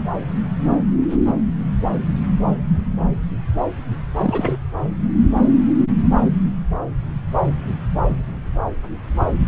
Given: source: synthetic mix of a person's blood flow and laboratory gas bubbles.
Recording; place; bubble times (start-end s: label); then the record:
Doppler ultrasound of blood flow; subclavian vein
4.18-4.58 s: bubbles
From the record:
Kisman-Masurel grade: 212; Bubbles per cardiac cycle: several, 3 to 8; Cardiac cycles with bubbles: 1 to 10%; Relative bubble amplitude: moderate (0.250 to 0.450); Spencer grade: 1 (occasional bubble signal discernible with the cardiac motion signal, with majority of cardiac periods free of bubbles); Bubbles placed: anywhere in the cardiac cycle